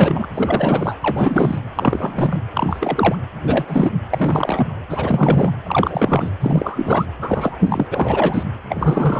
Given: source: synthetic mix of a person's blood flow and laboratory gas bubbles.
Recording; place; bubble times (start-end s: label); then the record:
Doppler ultrasound of blood flow; precordium
0.00-0.27 s: bubbles
0.34-0.95 s: bubbles
1.01-1.58 s: bubbles
1.75-2.42 s: bubbles
2.54-3.16 s: bubbles
3.46-3.91 s: bubbles
4.10-4.67 s: bubbles
4.89-5.50 s: bubbles
5.67-6.30 s: bubbles
6.40-7.05 s: bubbles
7.21-7.57 s: bubbles
7.59-7.86 s: bubbles
7.91-8.43 s: bubbles
8.69-9.20 s: bubbles
From the record:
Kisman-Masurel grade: 343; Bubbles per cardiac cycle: rolling drumbeat, 9 or more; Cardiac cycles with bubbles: 100%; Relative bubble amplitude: loud (0.450 to 0.775); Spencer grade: 3 (all of the cardiac periods contain showers or single bubble signals, but not dominating or overriding the cardiac motion signals); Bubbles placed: anywhere in the cardiac cycle